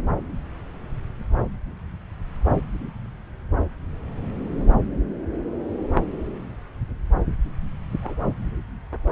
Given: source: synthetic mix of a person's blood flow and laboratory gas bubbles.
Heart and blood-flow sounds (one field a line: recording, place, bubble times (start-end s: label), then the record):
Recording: Doppler ultrasound of blood flow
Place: subclavian vein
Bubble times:
5.33-5.53 s: bubbles
8.03-8.15 s: bubbles
From the record:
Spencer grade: 2 (many but less than half of the cardiac periods contain bubble signals, singularly or in groups)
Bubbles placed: anywhere in the cardiac cycle